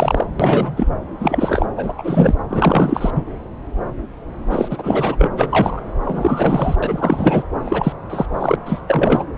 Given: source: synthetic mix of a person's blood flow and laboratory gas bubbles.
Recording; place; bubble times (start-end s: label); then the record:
Doppler ultrasound of blood flow; subclavian vein
0.00-0.26 s: bubbles
0.40-0.87 s: bubbles
1.20-1.66 s: bubbles
1.76-1.93 s: bubbles
1.97-2.35 s: bubbles
2.49-3.10 s: bubbles
3.15-3.23 s: bubbles
4.50-5.31 s: bubbles
5.36-5.80 s: bubbles
6.04-6.76 s: bubbles
6.82-7.42 s: bubbles
7.65-7.92 s: bubbles
8.10-8.26 s: bubbles
8.34-8.55 s: bubbles
8.65-8.80 s: bubbles
8.88-9.25 s: bubbles
From the record:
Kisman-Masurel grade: 333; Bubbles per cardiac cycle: rolling drumbeat, 9 or more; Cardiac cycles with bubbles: 50 to 99%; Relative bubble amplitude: loud (0.450 to 0.775); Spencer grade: 3 (all of the cardiac periods contain showers or single bubble signals, but not dominating or overriding the cardiac motion signals); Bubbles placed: anywhere in the cardiac cycle